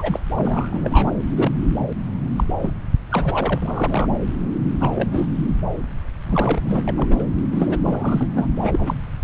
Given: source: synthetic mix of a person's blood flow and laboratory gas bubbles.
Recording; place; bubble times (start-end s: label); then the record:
Doppler ultrasound of blood flow; subclavian vein
0.00-0.20 s: bubbles
0.36-1.11 s: bubbles
1.36-1.51 s: bubbles
2.38-2.44 s: bubbles
2.62-2.73 s: bubbles
3.11-4.07 s: bubbles
4.79-4.91 s: bubbles
4.95-5.26 s: bubbles
6.26-6.83 s: bubbles
6.88-7.15 s: bubbles
7.18-7.23 s: bubbles
7.51-7.77 s: bubbles
7.83-8.27 s: bubbles
8.36-8.47 s: bubbles
8.62-8.94 s: bubbles
From the record:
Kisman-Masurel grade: 242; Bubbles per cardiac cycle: several, 3 to 8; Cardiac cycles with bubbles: 100%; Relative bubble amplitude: moderate (0.250 to 0.450); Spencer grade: 3 (all of the cardiac periods contain showers or single bubble signals, but not dominating or overriding the cardiac motion signals); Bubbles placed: anywhere in the cardiac cycle